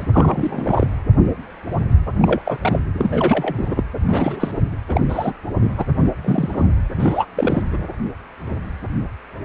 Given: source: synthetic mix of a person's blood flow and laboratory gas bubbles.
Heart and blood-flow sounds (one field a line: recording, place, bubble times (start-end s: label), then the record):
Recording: Doppler ultrasound of blood flow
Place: precordium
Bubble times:
0.00-0.06 s: bubbles
0.12-0.88 s: bubbles
2.18-2.41 s: bubbles
2.43-2.58 s: bubbles
2.62-2.79 s: bubbles
2.97-3.54 s: bubbles
3.57-3.83 s: bubbles
4.08-4.52 s: bubbles
4.89-5.01 s: bubbles
5.08-5.34 s: bubbles
5.60-5.71 s: bubbles
5.78-5.85 s: bubbles
6.03-6.12 s: bubbles
6.25-6.67 s: bubbles
6.96-7.26 s: bubbles
7.36-7.62 s: bubbles
7.71-7.78 s: bubbles
From the record:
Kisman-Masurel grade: 233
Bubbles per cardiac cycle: several, 3 to 8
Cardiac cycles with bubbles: 50 to 99%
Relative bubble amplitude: loud (0.450 to 0.775)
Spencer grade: 3 (all of the cardiac periods contain showers or single bubble signals, but not dominating or overriding the cardiac motion signals)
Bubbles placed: anywhere in the cardiac cycle